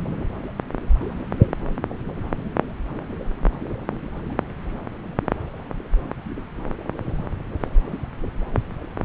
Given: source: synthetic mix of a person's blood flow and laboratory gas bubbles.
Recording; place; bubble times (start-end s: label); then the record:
Doppler ultrasound of blood flow; subclavian vein
1.38-1.48 s: bubbles
From the record:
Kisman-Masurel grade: 111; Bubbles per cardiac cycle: 1 to 2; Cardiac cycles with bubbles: 1 to 10%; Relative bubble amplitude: barely perceptible (0.100 to 0.250); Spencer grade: 1 (occasional bubble signal discernible with the cardiac motion signal, with majority of cardiac periods free of bubbles); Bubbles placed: anywhere in the cardiac cycle